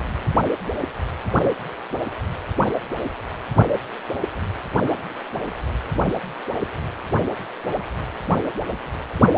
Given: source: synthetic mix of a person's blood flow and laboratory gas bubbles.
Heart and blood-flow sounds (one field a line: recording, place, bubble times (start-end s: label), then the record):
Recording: Doppler ultrasound of blood flow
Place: precordium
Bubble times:
no bubbles
From the record:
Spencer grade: 0 (complete lack of bubble signals)